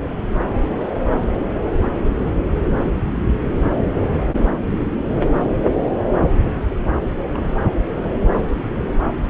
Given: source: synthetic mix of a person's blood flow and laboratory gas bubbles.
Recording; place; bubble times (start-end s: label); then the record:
Doppler ultrasound of blood flow; subclavian vein
2.12-2.30 s: bubbles
2.86-2.98 s: bubbles
7.32-7.46 s: bubbles
7.50-7.59 s: bubbles
8.27-8.37 s: bubbles
From the record:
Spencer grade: 2 (many but less than half of the cardiac periods contain bubble signals, singularly or in groups); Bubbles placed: anywhere in the cardiac cycle